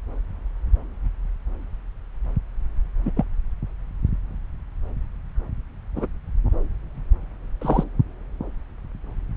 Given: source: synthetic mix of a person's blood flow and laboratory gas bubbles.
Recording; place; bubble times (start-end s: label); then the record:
Doppler ultrasound of blood flow; subclavian vein
3.06-3.11 s: bubbles
3.17-3.25 s: bubbles
5.96-6.06 s: bubbles
7.61-7.84 s: bubbles
From the record:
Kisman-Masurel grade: 122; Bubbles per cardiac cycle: 1 to 2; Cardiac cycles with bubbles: 10 to 50%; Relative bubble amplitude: moderate (0.250 to 0.450); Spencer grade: 2 (many but less than half of the cardiac periods contain bubble signals, singularly or in groups); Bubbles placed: anywhere in the cardiac cycle